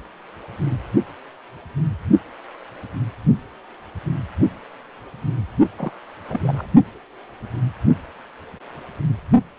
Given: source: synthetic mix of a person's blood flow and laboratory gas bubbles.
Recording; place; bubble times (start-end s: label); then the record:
Doppler ultrasound of blood flow; precordium
5.77-5.92 s: bubbles
6.28-6.67 s: bubbles
From the record:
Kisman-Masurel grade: 221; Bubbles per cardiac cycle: several, 3 to 8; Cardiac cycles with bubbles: 10 to 50%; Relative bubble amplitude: barely perceptible (0.100 to 0.250); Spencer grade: 2 (many but less than half of the cardiac periods contain bubble signals, singularly or in groups); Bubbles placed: only in the low amplitude regions of the cardiac cycle